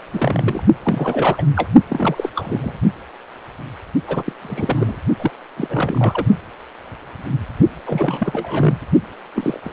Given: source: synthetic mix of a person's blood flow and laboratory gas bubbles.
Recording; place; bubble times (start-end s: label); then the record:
Doppler ultrasound of blood flow; precordium
0.12-0.63 s: bubbles
0.83-1.45 s: bubbles
1.56-1.68 s: bubbles
1.89-2.31 s: bubbles
2.35-2.79 s: bubbles
4.07-4.23 s: bubbles
4.25-4.33 s: bubbles
4.41-5.00 s: bubbles
5.18-5.31 s: bubbles
5.57-6.26 s: bubbles
7.87-8.77 s: bubbles
9.35-9.60 s: bubbles
9.62-9.73 s: bubbles
From the record:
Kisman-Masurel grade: 332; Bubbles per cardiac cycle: rolling drumbeat, 9 or more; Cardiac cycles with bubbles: 50 to 99%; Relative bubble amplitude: moderate (0.250 to 0.450); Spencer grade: 3 (all of the cardiac periods contain showers or single bubble signals, but not dominating or overriding the cardiac motion signals); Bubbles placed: only in the low amplitude regions of the cardiac cycle